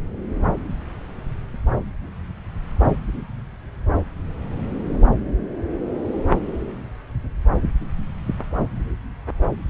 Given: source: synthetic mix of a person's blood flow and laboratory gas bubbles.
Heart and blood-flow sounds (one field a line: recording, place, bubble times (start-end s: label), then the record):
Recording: Doppler ultrasound of blood flow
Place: subclavian vein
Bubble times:
no bubbles
From the record:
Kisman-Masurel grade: 000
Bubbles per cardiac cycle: 0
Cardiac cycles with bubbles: 0%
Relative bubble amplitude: no bubbles discernible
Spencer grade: 0 (complete lack of bubble signals)